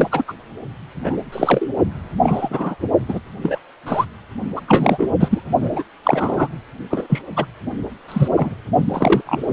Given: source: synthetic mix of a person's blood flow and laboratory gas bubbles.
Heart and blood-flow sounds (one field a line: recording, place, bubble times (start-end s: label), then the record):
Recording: Doppler ultrasound of blood flow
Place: precordium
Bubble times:
0.00-0.09 s: bubbles
0.12-0.24 s: bubbles
0.27-0.33 s: bubbles
1.04-1.18 s: bubbles
1.32-1.69 s: bubbles
2.22-2.75 s: bubbles
3.08-3.20 s: bubbles
3.42-3.59 s: bubbles
3.85-4.06 s: bubbles
4.56-4.61 s: bubbles
4.68-5.10 s: bubbles
5.20-5.41 s: bubbles
5.60-5.83 s: bubbles
6.03-6.49 s: bubbles
6.90-7.22 s: bubbles
7.36-7.46 s: bubbles
8.08-8.28 s: bubbles
8.36-8.55 s: bubbles
8.88-9.21 s: bubbles
9.26-9.53 s: bubbles
From the record:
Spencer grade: 3 (all of the cardiac periods contain showers or single bubble signals, but not dominating or overriding the cardiac motion signals)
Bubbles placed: only in the low amplitude regions of the cardiac cycle